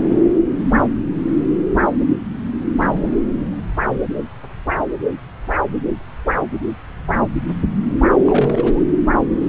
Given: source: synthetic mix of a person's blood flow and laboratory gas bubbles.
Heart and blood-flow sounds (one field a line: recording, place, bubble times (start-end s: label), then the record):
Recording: Doppler ultrasound of blood flow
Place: subclavian vein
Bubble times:
2.76-3.16 s: bubbles
8.24-8.80 s: bubbles
From the record:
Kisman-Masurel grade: 211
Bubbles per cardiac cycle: several, 3 to 8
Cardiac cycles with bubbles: 1 to 10%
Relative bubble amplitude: barely perceptible (0.100 to 0.250)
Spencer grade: 1 (occasional bubble signal discernible with the cardiac motion signal, with majority of cardiac periods free of bubbles)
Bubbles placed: anywhere in the cardiac cycle